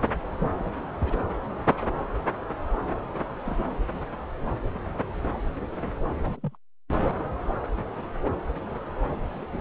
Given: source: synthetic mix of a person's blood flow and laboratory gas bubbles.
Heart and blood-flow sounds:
Doppler ultrasound of blood flow; subclavian vein
0.40-0.51 s: bubbles
0.59-0.70 s: bubbles
1.03-1.17 s: bubbles
3.46-3.64 s: bubbles
6.20-6.40 s: bubbles
6.43-6.55 s: bubbles
7.18-7.24 s: bubbles
9.53-9.61 s: bubbles
From the record:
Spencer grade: 2 (many but less than half of the cardiac periods contain bubble signals, singularly or in groups); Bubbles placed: anywhere in the cardiac cycle

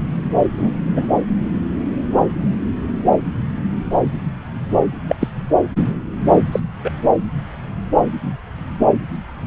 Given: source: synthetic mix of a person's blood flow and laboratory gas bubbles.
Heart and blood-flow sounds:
Doppler ultrasound of blood flow; subclavian vein
0.55-0.74 s: bubbles
0.91-1.06 s: bubbles
5.08-5.16 s: bubbles
5.20-5.28 s: bubbles
6.51-6.59 s: bubbles
6.83-6.91 s: bubbles
From the record:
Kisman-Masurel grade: 123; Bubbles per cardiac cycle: 1 to 2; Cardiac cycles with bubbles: 10 to 50%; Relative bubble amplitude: loud (0.450 to 0.775); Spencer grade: 2 (many but less than half of the cardiac periods contain bubble signals, singularly or in groups); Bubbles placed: anywhere in the cardiac cycle

